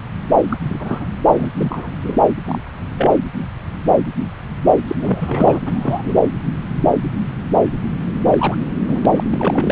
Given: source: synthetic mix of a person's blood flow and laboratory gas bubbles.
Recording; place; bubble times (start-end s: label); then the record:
Doppler ultrasound of blood flow; subclavian vein
0.49-0.57 s: bubbles
0.59-1.06 s: bubbles
1.36-1.52 s: bubbles
1.57-2.18 s: bubbles
2.44-2.62 s: bubbles
2.97-3.14 s: bubbles
4.87-4.95 s: bubbles
4.98-5.59 s: bubbles
5.65-6.14 s: bubbles
8.30-8.58 s: bubbles
8.88-9.00 s: bubbles
9.03-9.05 s: bubbles
9.16-9.24 s: bubbles
9.29-9.72 s: bubbles
From the record:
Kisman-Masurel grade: 232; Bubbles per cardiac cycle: several, 3 to 8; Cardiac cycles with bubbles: 50 to 99%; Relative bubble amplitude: moderate (0.250 to 0.450); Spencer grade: 3 (all of the cardiac periods contain showers or single bubble signals, but not dominating or overriding the cardiac motion signals); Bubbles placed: anywhere in the cardiac cycle